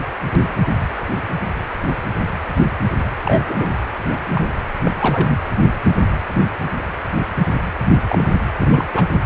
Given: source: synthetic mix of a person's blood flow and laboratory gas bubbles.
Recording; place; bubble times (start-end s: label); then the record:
Doppler ultrasound of blood flow; precordium
3.23-3.69 s: bubbles
4.05-4.22 s: bubbles
4.33-4.46 s: bubbles
4.85-4.91 s: bubbles
4.99-5.40 s: bubbles
7.92-7.97 s: bubbles
8.08-8.38 s: bubbles
8.58-8.84 s: bubbles
8.93-9.05 s: bubbles
9.12-9.20 s: bubbles
From the record:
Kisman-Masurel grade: 222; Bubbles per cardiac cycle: several, 3 to 8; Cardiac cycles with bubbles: 10 to 50%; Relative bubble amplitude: moderate (0.250 to 0.450); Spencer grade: 2 (many but less than half of the cardiac periods contain bubble signals, singularly or in groups); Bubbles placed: anywhere in the cardiac cycle